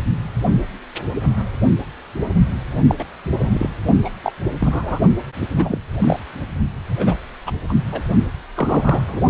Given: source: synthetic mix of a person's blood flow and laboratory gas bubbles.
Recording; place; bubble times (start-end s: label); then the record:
Doppler ultrasound of blood flow; precordium
2.88-2.95 s: bubbles
2.99-3.05 s: bubbles
3.30-3.68 s: bubbles
4.04-4.10 s: bubbles
4.23-4.32 s: bubbles
4.58-5.00 s: bubbles
5.58-5.79 s: bubbles
6.00-6.20 s: bubbles
6.99-7.16 s: bubbles
7.46-7.51 s: bubbles
7.69-7.74 s: bubbles
7.92-8.02 s: bubbles
8.54-9.02 s: bubbles
9.08-9.21 s: bubbles
From the record:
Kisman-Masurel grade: 232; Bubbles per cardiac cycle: several, 3 to 8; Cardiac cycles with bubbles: 50 to 99%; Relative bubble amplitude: moderate (0.250 to 0.450); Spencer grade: 3 (all of the cardiac periods contain showers or single bubble signals, but not dominating or overriding the cardiac motion signals); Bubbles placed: only in the low amplitude regions of the cardiac cycle